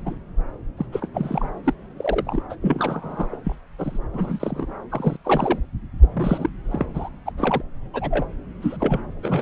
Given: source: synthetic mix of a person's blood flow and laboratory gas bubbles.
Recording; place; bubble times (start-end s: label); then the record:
Doppler ultrasound of blood flow; subclavian vein
0.05-0.15 s: bubbles
0.77-0.86 s: bubbles
0.92-1.08 s: bubbles
1.14-1.46 s: bubbles
1.64-1.74 s: bubbles
1.97-2.42 s: bubbles
2.49-2.56 s: bubbles
2.61-3.26 s: bubbles
3.31-3.36 s: bubbles
3.44-3.55 s: bubbles
3.79-3.98 s: bubbles
4.13-4.66 s: bubbles
4.90-5.17 s: bubbles
5.25-5.59 s: bubbles
5.98-6.50 s: bubbles
6.71-6.83 s: bubbles
6.93-7.09 s: bubbles
7.25-7.32 s: bubbles
7.38-7.62 s: bubbles
7.93-8.26 s: bubbles
8.62-8.77 s: bubbles
8.79-9.01 s: bubbles
9.23-9.42 s: bubbles
From the record:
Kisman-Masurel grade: 242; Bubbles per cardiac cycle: several, 3 to 8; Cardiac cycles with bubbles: 100%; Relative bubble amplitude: moderate (0.250 to 0.450); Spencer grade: 3 (all of the cardiac periods contain showers or single bubble signals, but not dominating or overriding the cardiac motion signals); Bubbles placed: anywhere in the cardiac cycle